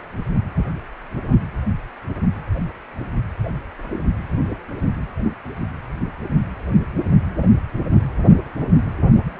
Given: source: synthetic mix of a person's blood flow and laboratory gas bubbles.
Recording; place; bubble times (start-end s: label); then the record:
Doppler ultrasound of blood flow; precordium
9.13-9.23 s: bubbles
9.29-9.40 s: bubbles
From the record:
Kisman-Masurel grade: 211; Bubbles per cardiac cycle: several, 3 to 8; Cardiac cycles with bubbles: 1 to 10%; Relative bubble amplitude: barely perceptible (0.100 to 0.250); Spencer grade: 1 (occasional bubble signal discernible with the cardiac motion signal, with majority of cardiac periods free of bubbles); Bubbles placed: anywhere in the cardiac cycle